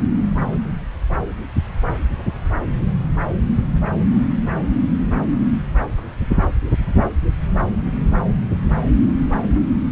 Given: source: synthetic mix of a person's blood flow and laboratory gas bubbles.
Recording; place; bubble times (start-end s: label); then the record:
Doppler ultrasound of blood flow; subclavian vein
no bubbles
From the record:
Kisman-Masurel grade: 000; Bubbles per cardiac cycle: 0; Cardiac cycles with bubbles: 0%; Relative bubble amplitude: no bubbles discernible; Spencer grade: 0 (complete lack of bubble signals)